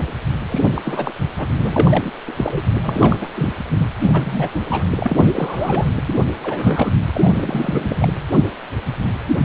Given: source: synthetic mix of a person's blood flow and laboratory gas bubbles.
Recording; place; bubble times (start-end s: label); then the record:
Doppler ultrasound of blood flow; precordium
0.48-1.11 s: bubbles
1.38-1.47 s: bubbles
1.57-2.10 s: bubbles
2.27-2.33 s: bubbles
2.36-2.62 s: bubbles
2.83-3.18 s: bubbles
3.21-3.27 s: bubbles
3.35-3.53 s: bubbles
3.70-3.88 s: bubbles
4.04-4.11 s: bubbles
4.13-4.50 s: bubbles
4.54-4.61 s: bubbles
4.70-4.84 s: bubbles
4.96-5.88 s: bubbles
6.07-6.13 s: bubbles
6.18-6.92 s: bubbles
7.13-8.09 s: bubbles
From the record:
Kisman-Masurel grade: 332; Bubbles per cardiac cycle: rolling drumbeat, 9 or more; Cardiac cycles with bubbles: 50 to 99%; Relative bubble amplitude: moderate (0.250 to 0.450); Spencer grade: 3 (all of the cardiac periods contain showers or single bubble signals, but not dominating or overriding the cardiac motion signals); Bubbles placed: anywhere in the cardiac cycle